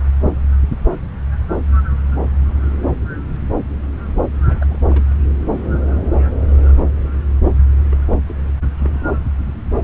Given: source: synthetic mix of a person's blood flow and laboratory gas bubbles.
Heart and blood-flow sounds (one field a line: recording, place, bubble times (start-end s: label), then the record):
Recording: Doppler ultrasound of blood flow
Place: subclavian vein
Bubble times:
4.48-4.79 s: bubbles
4.84-5.09 s: bubbles
7.90-7.97 s: bubbles
8.11-8.19 s: bubbles
8.28-8.35 s: bubbles
8.61-8.66 s: bubbles
8.79-9.06 s: bubbles
From the record:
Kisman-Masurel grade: 221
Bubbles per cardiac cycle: several, 3 to 8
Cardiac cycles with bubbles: 10 to 50%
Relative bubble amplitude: barely perceptible (0.100 to 0.250)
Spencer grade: 2 (many but less than half of the cardiac periods contain bubble signals, singularly or in groups)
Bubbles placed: anywhere in the cardiac cycle